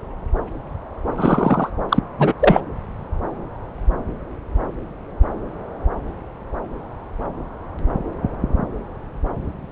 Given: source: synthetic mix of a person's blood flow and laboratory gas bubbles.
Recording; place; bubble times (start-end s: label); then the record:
Doppler ultrasound of blood flow; subclavian vein
1.17-1.70 s: bubbles
1.89-2.00 s: bubbles
2.18-2.33 s: bubbles
2.40-2.60 s: bubbles
From the record:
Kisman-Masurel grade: 213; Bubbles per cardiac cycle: several, 3 to 8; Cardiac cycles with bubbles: 1 to 10%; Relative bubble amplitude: loud (0.450 to 0.775); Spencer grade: 1 (occasional bubble signal discernible with the cardiac motion signal, with majority of cardiac periods free of bubbles); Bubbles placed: anywhere in the cardiac cycle